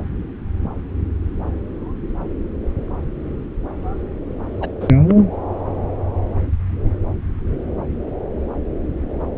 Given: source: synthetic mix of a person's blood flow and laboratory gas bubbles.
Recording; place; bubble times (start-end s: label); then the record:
Doppler ultrasound of blood flow; subclavian vein
4.60-4.69 s: bubbles
4.80-4.88 s: bubbles
5.07-5.25 s: bubbles
From the record:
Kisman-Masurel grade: 212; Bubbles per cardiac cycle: several, 3 to 8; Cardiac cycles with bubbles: 1 to 10%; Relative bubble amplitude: moderate (0.250 to 0.450); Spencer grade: 1 (occasional bubble signal discernible with the cardiac motion signal, with majority of cardiac periods free of bubbles); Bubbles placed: anywhere in the cardiac cycle